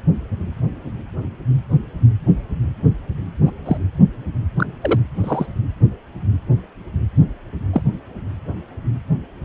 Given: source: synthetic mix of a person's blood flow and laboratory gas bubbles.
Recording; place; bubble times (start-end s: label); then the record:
Doppler ultrasound of blood flow; precordium
3.45-3.52 s: bubbles
3.66-3.77 s: bubbles
4.56-4.67 s: bubbles
4.81-5.00 s: bubbles
5.23-5.46 s: bubbles
7.73-7.82 s: bubbles
From the record:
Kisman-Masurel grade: 122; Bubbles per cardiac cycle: 1 to 2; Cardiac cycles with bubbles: 10 to 50%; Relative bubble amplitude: moderate (0.250 to 0.450); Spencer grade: 2 (many but less than half of the cardiac periods contain bubble signals, singularly or in groups); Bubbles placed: anywhere in the cardiac cycle